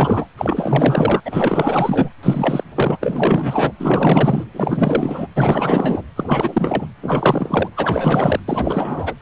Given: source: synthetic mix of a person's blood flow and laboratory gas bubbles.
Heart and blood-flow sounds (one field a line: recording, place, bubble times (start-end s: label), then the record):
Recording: Doppler ultrasound of blood flow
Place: precordium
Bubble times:
0.00-0.26 s: bubbles
0.37-1.21 s: bubbles
1.25-2.10 s: bubbles
2.23-2.64 s: bubbles
2.76-2.98 s: bubbles
3.01-3.72 s: bubbles
3.79-4.44 s: bubbles
4.54-5.27 s: bubbles
5.35-6.02 s: bubbles
6.15-6.87 s: bubbles
7.02-7.70 s: bubbles
7.77-8.39 s: bubbles
8.47-9.13 s: bubbles
9.20-9.22 s: bubbles
From the record:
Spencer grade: 4 (maximum detectable bubble signal sounding continuously throughout systole and diastole of every cardiac period, and overriding the amplitude of the normal cardiac signals)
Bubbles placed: anywhere in the cardiac cycle